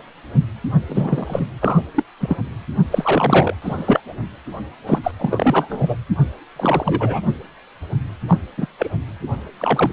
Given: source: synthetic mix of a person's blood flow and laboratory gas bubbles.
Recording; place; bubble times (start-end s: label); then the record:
Doppler ultrasound of blood flow; precordium
0.89-1.47 s: bubbles
1.60-1.81 s: bubbles
1.95-2.04 s: bubbles
2.20-2.36 s: bubbles
2.90-3.56 s: bubbles
3.61-4.00 s: bubbles
4.86-5.00 s: bubbles
5.03-5.12 s: bubbles
5.18-5.96 s: bubbles
6.56-7.21 s: bubbles
8.28-8.37 s: bubbles
8.58-8.66 s: bubbles
8.78-8.89 s: bubbles
9.59-9.93 s: bubbles
From the record:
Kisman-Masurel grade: 233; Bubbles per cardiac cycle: several, 3 to 8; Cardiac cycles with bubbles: 50 to 99%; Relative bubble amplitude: loud (0.450 to 0.775); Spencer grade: 3 (all of the cardiac periods contain showers or single bubble signals, but not dominating or overriding the cardiac motion signals); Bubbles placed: anywhere in the cardiac cycle